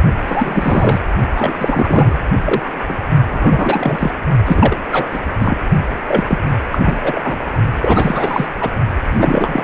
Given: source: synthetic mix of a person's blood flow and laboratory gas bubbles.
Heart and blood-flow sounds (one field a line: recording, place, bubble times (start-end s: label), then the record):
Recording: Doppler ultrasound of blood flow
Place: precordium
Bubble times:
0.26-1.05 s: bubbles
1.35-1.55 s: bubbles
1.57-2.20 s: bubbles
2.44-2.69 s: bubbles
2.88-2.96 s: bubbles
3.31-4.11 s: bubbles
4.46-4.77 s: bubbles
4.92-5.20 s: bubbles
5.41-5.58 s: bubbles
6.07-6.25 s: bubbles
6.29-6.38 s: bubbles
6.71-7.00 s: bubbles
7.03-7.38 s: bubbles
7.82-8.46 s: bubbles
8.61-8.71 s: bubbles
9.10-9.64 s: bubbles
From the record:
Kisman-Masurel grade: 343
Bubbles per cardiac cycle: rolling drumbeat, 9 or more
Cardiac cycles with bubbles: 100%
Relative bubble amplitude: loud (0.450 to 0.775)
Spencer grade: 3 (all of the cardiac periods contain showers or single bubble signals, but not dominating or overriding the cardiac motion signals)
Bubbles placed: only in the low amplitude regions of the cardiac cycle